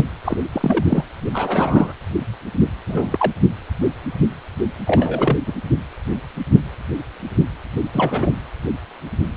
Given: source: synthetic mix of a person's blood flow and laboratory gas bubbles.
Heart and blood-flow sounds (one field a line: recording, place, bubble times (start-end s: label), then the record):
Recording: Doppler ultrasound of blood flow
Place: precordium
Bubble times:
0.00-0.03 s: bubbles
0.24-0.37 s: bubbles
0.52-1.03 s: bubbles
1.33-1.93 s: bubbles
2.88-3.32 s: bubbles
4.87-5.37 s: bubbles
5.46-5.53 s: bubbles
7.93-8.31 s: bubbles
From the record:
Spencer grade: 3 (all of the cardiac periods contain showers or single bubble signals, but not dominating or overriding the cardiac motion signals)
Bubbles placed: anywhere in the cardiac cycle